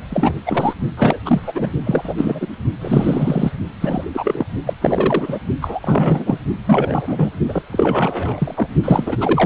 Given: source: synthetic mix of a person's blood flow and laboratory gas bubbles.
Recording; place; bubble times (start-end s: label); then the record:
Doppler ultrasound of blood flow; precordium
0.10-0.40 s: bubbles
0.46-0.73 s: bubbles
0.97-1.20 s: bubbles
1.25-1.52 s: bubbles
1.54-1.70 s: bubbles
1.84-2.15 s: bubbles
2.17-2.48 s: bubbles
2.81-3.53 s: bubbles
3.80-4.04 s: bubbles
4.13-4.46 s: bubbles
4.66-4.74 s: bubbles
4.80-5.38 s: bubbles
5.61-6.38 s: bubbles
6.66-7.30 s: bubbles
7.48-7.62 s: bubbles
7.72-8.68 s: bubbles
8.84-9.17 s: bubbles
9.20-9.45 s: bubbles
From the record:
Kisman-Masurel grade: 343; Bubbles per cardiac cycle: rolling drumbeat, 9 or more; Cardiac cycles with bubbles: 100%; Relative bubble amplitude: loud (0.450 to 0.775); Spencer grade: 3 (all of the cardiac periods contain showers or single bubble signals, but not dominating or overriding the cardiac motion signals); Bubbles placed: only in the low amplitude regions of the cardiac cycle